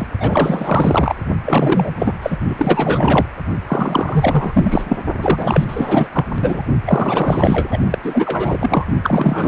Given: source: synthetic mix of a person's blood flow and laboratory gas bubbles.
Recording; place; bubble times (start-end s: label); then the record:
Doppler ultrasound of blood flow; precordium
0.00-0.07 s: bubbles
0.20-1.15 s: bubbles
1.45-1.91 s: bubbles
1.99-2.13 s: bubbles
2.22-2.37 s: bubbles
2.49-3.26 s: bubbles
3.67-4.96 s: bubbles
5.21-5.64 s: bubbles
5.67-6.08 s: bubbles
6.12-6.25 s: bubbles
6.36-6.62 s: bubbles
6.85-7.78 s: bubbles
7.90-7.98 s: bubbles
8.03-8.85 s: bubbles
9.03-9.48 s: bubbles
From the record:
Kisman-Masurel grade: 444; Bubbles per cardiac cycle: continuous sound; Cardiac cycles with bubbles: 100%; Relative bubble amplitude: maximal (0.775 to 0.999); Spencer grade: 4 (maximum detectable bubble signal sounding continuously throughout systole and diastole of every cardiac period, and overriding the amplitude of the normal cardiac signals); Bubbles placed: only in the low amplitude regions of the cardiac cycle